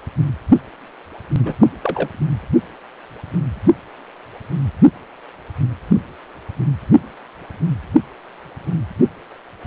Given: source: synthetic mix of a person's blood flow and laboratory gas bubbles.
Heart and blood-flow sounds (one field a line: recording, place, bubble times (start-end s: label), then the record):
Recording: Doppler ultrasound of blood flow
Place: precordium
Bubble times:
1.42-1.53 s: bubbles
1.59-1.68 s: bubbles
1.83-2.09 s: bubbles
From the record:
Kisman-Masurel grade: 212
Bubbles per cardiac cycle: several, 3 to 8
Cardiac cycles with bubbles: 1 to 10%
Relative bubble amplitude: moderate (0.250 to 0.450)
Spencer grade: 1 (occasional bubble signal discernible with the cardiac motion signal, with majority of cardiac periods free of bubbles)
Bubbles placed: anywhere in the cardiac cycle